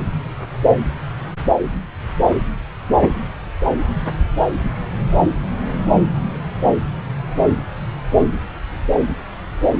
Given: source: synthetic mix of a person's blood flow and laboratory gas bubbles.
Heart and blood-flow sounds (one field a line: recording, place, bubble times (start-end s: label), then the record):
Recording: Doppler ultrasound of blood flow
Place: subclavian vein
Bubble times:
no bubbles
From the record:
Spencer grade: 0 (complete lack of bubble signals)